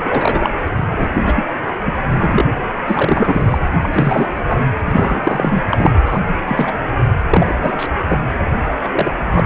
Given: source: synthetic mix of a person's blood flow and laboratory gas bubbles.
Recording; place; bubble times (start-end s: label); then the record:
Doppler ultrasound of blood flow; precordium
0.00-0.49 s: bubbles
0.92-1.09 s: bubbles
1.25-1.44 s: bubbles
1.85-1.93 s: bubbles
2.11-2.45 s: bubbles
2.68-2.72 s: bubbles
2.87-3.58 s: bubbles
3.72-3.78 s: bubbles
3.81-3.89 s: bubbles
3.92-4.27 s: bubbles
4.47-4.59 s: bubbles
4.85-5.63 s: bubbles
5.70-6.00 s: bubbles
6.05-6.21 s: bubbles
6.46-6.73 s: bubbles
7.30-7.55 s: bubbles
7.58-7.87 s: bubbles
8.07-8.18 s: bubbles
8.82-8.88 s: bubbles
8.91-9.12 s: bubbles
9.33-9.46 s: bubbles
From the record:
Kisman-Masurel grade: 243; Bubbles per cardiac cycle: several, 3 to 8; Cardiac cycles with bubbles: 100%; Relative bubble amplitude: loud (0.450 to 0.775); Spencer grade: 3 (all of the cardiac periods contain showers or single bubble signals, but not dominating or overriding the cardiac motion signals); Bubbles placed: anywhere in the cardiac cycle